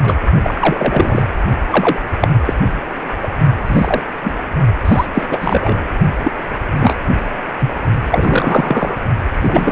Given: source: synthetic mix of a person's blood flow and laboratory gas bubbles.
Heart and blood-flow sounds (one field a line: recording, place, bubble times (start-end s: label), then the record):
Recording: Doppler ultrasound of blood flow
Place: precordium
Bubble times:
0.02-0.15 s: bubbles
0.42-1.22 s: bubbles
1.70-2.00 s: bubbles
2.21-2.28 s: bubbles
2.45-2.54 s: bubbles
3.23-3.28 s: bubbles
3.67-4.02 s: bubbles
4.24-4.34 s: bubbles
4.84-5.06 s: bubbles
5.14-5.83 s: bubbles
6.24-6.32 s: bubbles
6.79-6.95 s: bubbles
7.58-7.71 s: bubbles
8.10-8.98 s: bubbles
9.41-9.72 s: bubbles
From the record:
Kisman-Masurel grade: 233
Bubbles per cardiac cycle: several, 3 to 8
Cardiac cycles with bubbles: 50 to 99%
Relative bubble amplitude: loud (0.450 to 0.775)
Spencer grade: 3 (all of the cardiac periods contain showers or single bubble signals, but not dominating or overriding the cardiac motion signals)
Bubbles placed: only in the low amplitude regions of the cardiac cycle